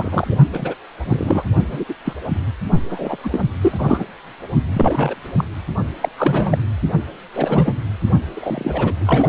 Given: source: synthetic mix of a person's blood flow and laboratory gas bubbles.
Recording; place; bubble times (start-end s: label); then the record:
Doppler ultrasound of blood flow; precordium
0.00-0.35 s: bubbles
0.53-0.74 s: bubbles
1.05-1.43 s: bubbles
1.72-1.84 s: bubbles
1.88-1.94 s: bubbles
2.04-2.13 s: bubbles
2.90-3.17 s: bubbles
3.23-3.40 s: bubbles
3.61-4.04 s: bubbles
4.73-5.14 s: bubbles
5.38-5.45 s: bubbles
6.00-6.09 s: bubbles
6.17-6.58 s: bubbles
7.33-7.72 s: bubbles
8.34-9.29 s: bubbles
From the record:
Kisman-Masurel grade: 242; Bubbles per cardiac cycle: several, 3 to 8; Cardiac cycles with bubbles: 100%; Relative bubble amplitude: moderate (0.250 to 0.450); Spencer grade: 3 (all of the cardiac periods contain showers or single bubble signals, but not dominating or overriding the cardiac motion signals); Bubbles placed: only in the low amplitude regions of the cardiac cycle